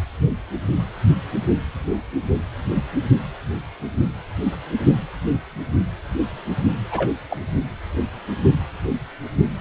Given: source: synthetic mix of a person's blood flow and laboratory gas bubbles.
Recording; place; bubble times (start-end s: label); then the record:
Doppler ultrasound of blood flow; precordium
6.91-7.12 s: bubbles
7.30-7.37 s: bubbles
From the record:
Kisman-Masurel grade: 212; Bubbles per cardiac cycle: several, 3 to 8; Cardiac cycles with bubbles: 1 to 10%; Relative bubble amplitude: moderate (0.250 to 0.450); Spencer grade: 1 (occasional bubble signal discernible with the cardiac motion signal, with majority of cardiac periods free of bubbles); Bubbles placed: only in the low amplitude regions of the cardiac cycle